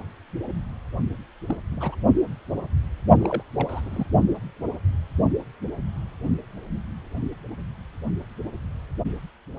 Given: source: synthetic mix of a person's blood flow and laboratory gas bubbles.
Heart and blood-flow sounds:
Doppler ultrasound of blood flow; precordium
1.46-1.56 s: bubbles
1.66-1.97 s: bubbles
3.19-3.43 s: bubbles
3.56-4.06 s: bubbles
From the record:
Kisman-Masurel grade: 221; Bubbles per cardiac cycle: several, 3 to 8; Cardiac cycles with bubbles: 10 to 50%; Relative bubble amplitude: barely perceptible (0.100 to 0.250); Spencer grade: 2 (many but less than half of the cardiac periods contain bubble signals, singularly or in groups); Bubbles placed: only in the low amplitude regions of the cardiac cycle

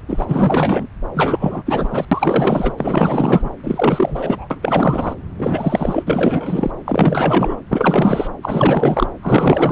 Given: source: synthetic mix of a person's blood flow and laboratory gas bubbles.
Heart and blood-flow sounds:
Doppler ultrasound of blood flow; subclavian vein
0.08-0.87 s: bubbles
1.14-1.63 s: bubbles
1.66-1.89 s: bubbles
1.92-2.05 s: bubbles
2.11-2.73 s: bubbles
2.77-3.49 s: bubbles
3.63-4.47 s: bubbles
4.50-5.14 s: bubbles
5.38-6.71 s: bubbles
6.85-7.61 s: bubbles
7.69-8.28 s: bubbles
8.43-9.08 s: bubbles
9.22-9.71 s: bubbles
From the record:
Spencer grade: 4 (maximum detectable bubble signal sounding continuously throughout systole and diastole of every cardiac period, and overriding the amplitude of the normal cardiac signals); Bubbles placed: anywhere in the cardiac cycle

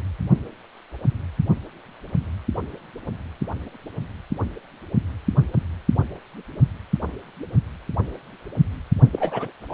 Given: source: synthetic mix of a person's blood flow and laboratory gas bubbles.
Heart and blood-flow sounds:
Doppler ultrasound of blood flow; precordium
9.12-9.51 s: bubbles
9.69-9.73 s: bubbles
From the record:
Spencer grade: 1 (occasional bubble signal discernible with the cardiac motion signal, with majority of cardiac periods free of bubbles); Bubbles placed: only in the low amplitude regions of the cardiac cycle

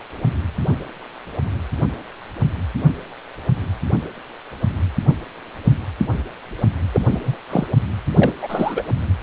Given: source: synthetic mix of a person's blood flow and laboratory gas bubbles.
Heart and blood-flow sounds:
Doppler ultrasound of blood flow; precordium
6.93-7.01 s: bubbles
7.05-7.19 s: bubbles
7.25-7.37 s: bubbles
7.50-7.67 s: bubbles
8.14-8.32 s: bubbles
8.41-8.82 s: bubbles
From the record:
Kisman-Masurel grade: 223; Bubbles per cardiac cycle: several, 3 to 8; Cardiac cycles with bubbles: 10 to 50%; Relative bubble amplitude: loud (0.450 to 0.775); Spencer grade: 2 (many but less than half of the cardiac periods contain bubble signals, singularly or in groups); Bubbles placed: anywhere in the cardiac cycle

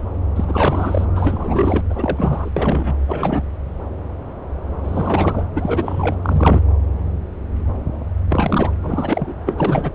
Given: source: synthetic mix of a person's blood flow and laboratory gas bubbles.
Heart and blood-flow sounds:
Doppler ultrasound of blood flow; subclavian vein
0.36-1.05 s: bubbles
1.15-1.84 s: bubbles
1.90-2.50 s: bubbles
2.56-2.95 s: bubbles
3.00-3.44 s: bubbles
4.84-5.44 s: bubbles
5.56-6.16 s: bubbles
6.23-6.62 s: bubbles
8.29-8.71 s: bubbles
8.83-9.34 s: bubbles
9.46-9.92 s: bubbles
From the record:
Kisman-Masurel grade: 333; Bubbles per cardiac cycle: rolling drumbeat, 9 or more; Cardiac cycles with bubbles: 50 to 99%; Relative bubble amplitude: loud (0.450 to 0.775); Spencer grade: 3 (all of the cardiac periods contain showers or single bubble signals, but not dominating or overriding the cardiac motion signals); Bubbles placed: anywhere in the cardiac cycle

